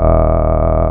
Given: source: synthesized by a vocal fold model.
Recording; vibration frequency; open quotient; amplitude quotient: sustained vowel; 40 Hz; 0.5; 1.1